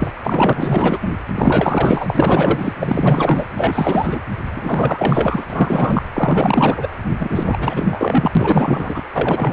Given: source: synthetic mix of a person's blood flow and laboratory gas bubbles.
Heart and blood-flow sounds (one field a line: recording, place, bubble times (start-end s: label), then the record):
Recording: Doppler ultrasound of blood flow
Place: precordium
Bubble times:
0.00-0.11 s: bubbles
0.23-0.98 s: bubbles
1.01-1.09 s: bubbles
1.34-2.73 s: bubbles
2.80-3.45 s: bubbles
3.54-4.19 s: bubbles
4.55-5.46 s: bubbles
5.50-6.03 s: bubbles
6.13-6.88 s: bubbles
7.19-8.32 s: bubbles
8.35-9.03 s: bubbles
9.14-9.53 s: bubbles
From the record:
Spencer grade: 4 (maximum detectable bubble signal sounding continuously throughout systole and diastole of every cardiac period, and overriding the amplitude of the normal cardiac signals)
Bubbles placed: anywhere in the cardiac cycle